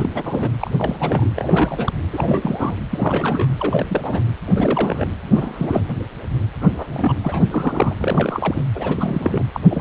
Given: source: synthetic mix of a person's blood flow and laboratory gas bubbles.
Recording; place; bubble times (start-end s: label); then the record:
Doppler ultrasound of blood flow; precordium
0.00-0.10 s: bubbles
0.14-0.49 s: bubbles
0.60-0.71 s: bubbles
0.77-1.30 s: bubbles
1.36-1.93 s: bubbles
2.11-2.76 s: bubbles
2.91-3.49 s: bubbles
3.58-4.22 s: bubbles
4.46-5.06 s: bubbles
5.32-5.87 s: bubbles
6.61-7.14 s: bubbles
7.22-7.46 s: bubbles
7.51-7.95 s: bubbles
7.97-8.64 s: bubbles
8.74-9.44 s: bubbles
9.53-9.60 s: bubbles
9.69-9.81 s: bubbles
From the record:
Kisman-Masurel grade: 342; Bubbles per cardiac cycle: rolling drumbeat, 9 or more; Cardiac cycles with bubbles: 100%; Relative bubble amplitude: moderate (0.250 to 0.450); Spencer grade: 3 (all of the cardiac periods contain showers or single bubble signals, but not dominating or overriding the cardiac motion signals); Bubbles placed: anywhere in the cardiac cycle